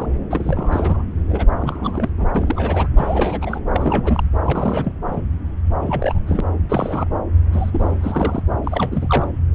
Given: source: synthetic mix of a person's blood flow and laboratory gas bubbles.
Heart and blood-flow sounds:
Doppler ultrasound of blood flow; subclavian vein
0.00-0.06 s: bubbles
0.30-1.03 s: bubbles
1.29-1.46 s: bubbles
1.59-2.10 s: bubbles
2.16-2.31 s: bubbles
2.35-2.88 s: bubbles
2.97-3.60 s: bubbles
3.71-4.24 s: bubbles
4.45-4.94 s: bubbles
5.05-5.21 s: bubbles
5.82-6.23 s: bubbles
6.27-6.41 s: bubbles
6.69-7.07 s: bubbles
7.52-8.43 s: bubbles
8.63-9.28 s: bubbles
From the record:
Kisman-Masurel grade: 342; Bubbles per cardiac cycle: rolling drumbeat, 9 or more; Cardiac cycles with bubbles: 100%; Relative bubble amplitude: moderate (0.250 to 0.450); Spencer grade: 3 (all of the cardiac periods contain showers or single bubble signals, but not dominating or overriding the cardiac motion signals); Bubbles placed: anywhere in the cardiac cycle

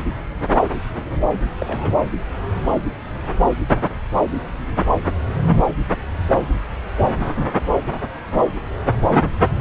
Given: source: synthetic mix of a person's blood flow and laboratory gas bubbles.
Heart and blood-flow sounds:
Doppler ultrasound of blood flow; subclavian vein
1.60-1.94 s: bubbles
From the record:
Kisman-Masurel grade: 112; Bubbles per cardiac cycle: 1 to 2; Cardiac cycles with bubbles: 1 to 10%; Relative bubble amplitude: moderate (0.250 to 0.450); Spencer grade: 1 (occasional bubble signal discernible with the cardiac motion signal, with majority of cardiac periods free of bubbles); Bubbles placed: anywhere in the cardiac cycle

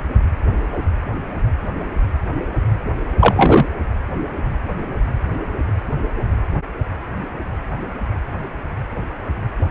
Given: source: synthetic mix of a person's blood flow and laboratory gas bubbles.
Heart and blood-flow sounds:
Doppler ultrasound of blood flow; precordium
3.19-3.66 s: bubbles
From the record:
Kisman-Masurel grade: 213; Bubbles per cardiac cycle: several, 3 to 8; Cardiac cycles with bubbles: 1 to 10%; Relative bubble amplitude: loud (0.450 to 0.775); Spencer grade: 1 (occasional bubble signal discernible with the cardiac motion signal, with majority of cardiac periods free of bubbles); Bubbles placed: anywhere in the cardiac cycle

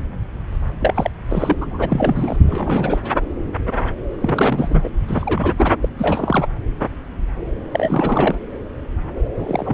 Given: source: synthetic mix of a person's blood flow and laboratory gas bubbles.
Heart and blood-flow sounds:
Doppler ultrasound of blood flow; subclavian vein
0.80-1.10 s: bubbles
1.28-1.55 s: bubbles
1.61-1.66 s: bubbles
1.71-2.38 s: bubbles
2.48-3.01 s: bubbles
4.21-4.89 s: bubbles
5.08-5.77 s: bubbles
5.82-5.89 s: bubbles
5.98-6.48 s: bubbles
7.71-8.38 s: bubbles
9.37-9.74 s: bubbles
From the record:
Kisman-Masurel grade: 332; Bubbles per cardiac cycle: rolling drumbeat, 9 or more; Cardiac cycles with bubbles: 50 to 99%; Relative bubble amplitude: moderate (0.250 to 0.450); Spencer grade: 3 (all of the cardiac periods contain showers or single bubble signals, but not dominating or overriding the cardiac motion signals); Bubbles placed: anywhere in the cardiac cycle

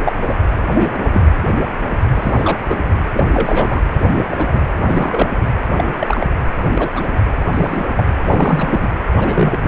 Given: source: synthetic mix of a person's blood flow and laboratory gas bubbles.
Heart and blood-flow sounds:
Doppler ultrasound of blood flow; precordium
0.05-0.12 s: bubbles
0.28-0.42 s: bubbles
0.74-0.94 s: bubbles
1.01-1.22 s: bubbles
2.14-2.59 s: bubbles
2.68-2.82 s: bubbles
3.13-3.26 s: bubbles
3.33-3.89 s: bubbles
3.98-4.27 s: bubbles
4.30-4.62 s: bubbles
4.75-5.27 s: bubbles
5.76-5.84 s: bubbles
5.87-5.94 s: bubbles
5.98-6.26 s: bubbles
6.55-6.90 s: bubbles
6.94-7.15 s: bubbles
7.52-7.84 s: bubbles
7.96-8.06 s: bubbles
8.20-8.88 s: bubbles
9.18-9.68 s: bubbles
From the record:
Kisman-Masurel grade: 232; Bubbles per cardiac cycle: several, 3 to 8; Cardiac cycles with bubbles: 50 to 99%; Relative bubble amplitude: moderate (0.250 to 0.450); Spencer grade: 3 (all of the cardiac periods contain showers or single bubble signals, but not dominating or overriding the cardiac motion signals); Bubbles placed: anywhere in the cardiac cycle

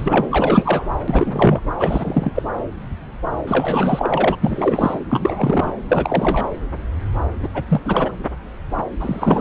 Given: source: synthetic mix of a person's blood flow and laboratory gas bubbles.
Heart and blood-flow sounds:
Doppler ultrasound of blood flow; subclavian vein
0.00-0.27 s: bubbles
0.31-0.89 s: bubbles
1.08-1.60 s: bubbles
1.77-2.31 s: bubbles
2.34-2.42 s: bubbles
3.47-4.37 s: bubbles
4.41-4.99 s: bubbles
5.09-5.72 s: bubbles
5.89-6.50 s: bubbles
7.42-7.49 s: bubbles
7.54-7.63 s: bubbles
7.68-7.81 s: bubbles
7.84-8.12 s: bubbles
9.00-9.41 s: bubbles
From the record:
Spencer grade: 3 (all of the cardiac periods contain showers or single bubble signals, but not dominating or overriding the cardiac motion signals); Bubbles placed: anywhere in the cardiac cycle

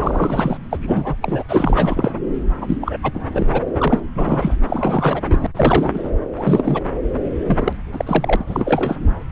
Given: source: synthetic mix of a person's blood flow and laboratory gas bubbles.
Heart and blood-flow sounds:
Doppler ultrasound of blood flow; subclavian vein
0.00-0.57 s: bubbles
0.71-0.77 s: bubbles
0.81-1.16 s: bubbles
1.22-1.43 s: bubbles
1.49-2.13 s: bubbles
2.61-2.77 s: bubbles
2.81-2.96 s: bubbles
3.02-3.11 s: bubbles
3.13-3.46 s: bubbles
3.52-3.62 s: bubbles
3.78-4.00 s: bubbles
4.15-4.55 s: bubbles
4.67-5.46 s: bubbles
5.55-6.11 s: bubbles
6.37-6.83 s: bubbles
7.46-7.73 s: bubbles
7.92-8.36 s: bubbles
8.39-8.44 s: bubbles
8.46-8.96 s: bubbles
From the record:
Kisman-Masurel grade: 332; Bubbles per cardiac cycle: rolling drumbeat, 9 or more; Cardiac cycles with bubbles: 50 to 99%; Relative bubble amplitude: moderate (0.250 to 0.450); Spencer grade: 3 (all of the cardiac periods contain showers or single bubble signals, but not dominating or overriding the cardiac motion signals); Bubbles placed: anywhere in the cardiac cycle

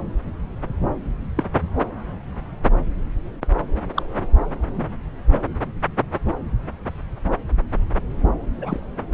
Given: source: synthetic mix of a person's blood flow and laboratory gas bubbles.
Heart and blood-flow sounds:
Doppler ultrasound of blood flow; subclavian vein
1.37-1.43 s: bubbles
3.96-4.02 s: bubbles
8.61-8.80 s: bubbles
From the record:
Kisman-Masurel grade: 122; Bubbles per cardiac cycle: 1 to 2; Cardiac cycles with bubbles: 10 to 50%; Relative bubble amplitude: moderate (0.250 to 0.450); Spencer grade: 2 (many but less than half of the cardiac periods contain bubble signals, singularly or in groups); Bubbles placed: anywhere in the cardiac cycle

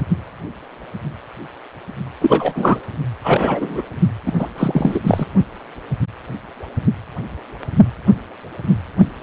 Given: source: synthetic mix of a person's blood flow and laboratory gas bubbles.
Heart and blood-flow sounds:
Doppler ultrasound of blood flow; precordium
2.21-2.79 s: bubbles
3.24-3.81 s: bubbles
4.26-4.33 s: bubbles
4.39-4.49 s: bubbles
4.58-5.00 s: bubbles
5.06-5.26 s: bubbles
From the record:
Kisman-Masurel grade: 223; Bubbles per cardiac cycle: several, 3 to 8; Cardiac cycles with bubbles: 10 to 50%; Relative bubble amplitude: loud (0.450 to 0.775); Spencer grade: 2 (many but less than half of the cardiac periods contain bubble signals, singularly or in groups); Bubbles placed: only in the low amplitude regions of the cardiac cycle

